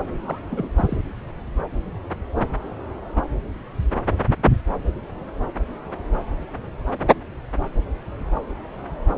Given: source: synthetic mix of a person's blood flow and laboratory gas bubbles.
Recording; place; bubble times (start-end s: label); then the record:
Doppler ultrasound of blood flow; subclavian vein
0.07-0.40 s: bubbles
0.50-0.70 s: bubbles
0.76-0.98 s: bubbles
From the record:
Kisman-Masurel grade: 211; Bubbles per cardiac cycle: several, 3 to 8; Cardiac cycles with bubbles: 1 to 10%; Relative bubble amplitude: barely perceptible (0.100 to 0.250); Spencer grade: 1 (occasional bubble signal discernible with the cardiac motion signal, with majority of cardiac periods free of bubbles); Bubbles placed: anywhere in the cardiac cycle